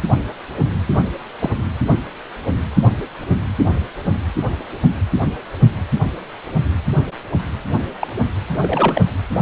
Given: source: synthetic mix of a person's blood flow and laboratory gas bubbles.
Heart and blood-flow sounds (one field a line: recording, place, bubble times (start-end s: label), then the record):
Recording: Doppler ultrasound of blood flow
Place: precordium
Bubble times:
1.39-1.50 s: bubbles
8.00-8.08 s: bubbles
8.60-9.04 s: bubbles
From the record:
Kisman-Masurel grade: 122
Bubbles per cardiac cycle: 1 to 2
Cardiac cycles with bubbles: 10 to 50%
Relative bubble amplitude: moderate (0.250 to 0.450)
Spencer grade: 2 (many but less than half of the cardiac periods contain bubble signals, singularly or in groups)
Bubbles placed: anywhere in the cardiac cycle